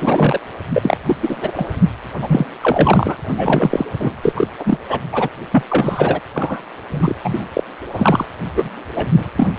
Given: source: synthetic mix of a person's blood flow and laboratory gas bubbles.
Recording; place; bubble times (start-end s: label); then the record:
Doppler ultrasound of blood flow; precordium
0.00-0.41 s: bubbles
0.73-0.98 s: bubbles
1.06-1.16 s: bubbles
1.22-1.37 s: bubbles
1.41-1.67 s: bubbles
2.21-2.45 s: bubbles
2.60-3.16 s: bubbles
3.25-3.85 s: bubbles
4.00-4.15 s: bubbles
4.22-4.33 s: bubbles
4.36-4.47 s: bubbles
4.59-4.79 s: bubbles
4.88-5.00 s: bubbles
5.12-5.29 s: bubbles
5.51-5.63 s: bubbles
5.69-6.21 s: bubbles
6.33-6.62 s: bubbles
6.92-7.14 s: bubbles
7.24-7.45 s: bubbles
7.53-7.63 s: bubbles
7.93-8.26 s: bubbles
8.55-8.69 s: bubbles
8.95-9.08 s: bubbles
9.16-9.29 s: bubbles
9.36-9.48 s: bubbles
From the record:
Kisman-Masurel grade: 343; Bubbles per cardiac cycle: rolling drumbeat, 9 or more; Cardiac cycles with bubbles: 100%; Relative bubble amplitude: loud (0.450 to 0.775); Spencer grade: 3 (all of the cardiac periods contain showers or single bubble signals, but not dominating or overriding the cardiac motion signals); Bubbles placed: anywhere in the cardiac cycle